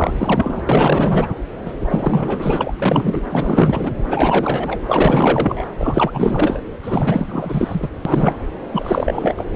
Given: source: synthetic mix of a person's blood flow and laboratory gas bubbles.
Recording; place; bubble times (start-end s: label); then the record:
Doppler ultrasound of blood flow; subclavian vein
0.00-1.28 s: bubbles
1.65-1.73 s: bubbles
1.79-2.73 s: bubbles
2.79-3.22 s: bubbles
3.29-3.92 s: bubbles
4.07-4.79 s: bubbles
4.87-5.64 s: bubbles
5.78-6.63 s: bubbles
6.82-7.88 s: bubbles
8.05-8.34 s: bubbles
8.71-9.46 s: bubbles
9.53-9.55 s: bubbles
From the record:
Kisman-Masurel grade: 444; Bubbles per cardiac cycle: continuous sound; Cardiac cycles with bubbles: 100%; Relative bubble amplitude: maximal (0.775 to 0.999); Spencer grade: 4 (maximum detectable bubble signal sounding continuously throughout systole and diastole of every cardiac period, and overriding the amplitude of the normal cardiac signals); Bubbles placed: anywhere in the cardiac cycle